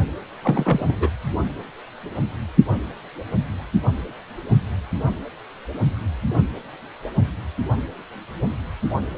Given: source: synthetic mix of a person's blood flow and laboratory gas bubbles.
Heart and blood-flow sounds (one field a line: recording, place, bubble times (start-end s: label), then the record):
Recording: Doppler ultrasound of blood flow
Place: precordium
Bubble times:
0.42-1.09 s: bubbles
From the record:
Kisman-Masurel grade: 112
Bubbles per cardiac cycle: 1 to 2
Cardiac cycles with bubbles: 1 to 10%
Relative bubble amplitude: moderate (0.250 to 0.450)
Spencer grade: 1 (occasional bubble signal discernible with the cardiac motion signal, with majority of cardiac periods free of bubbles)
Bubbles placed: anywhere in the cardiac cycle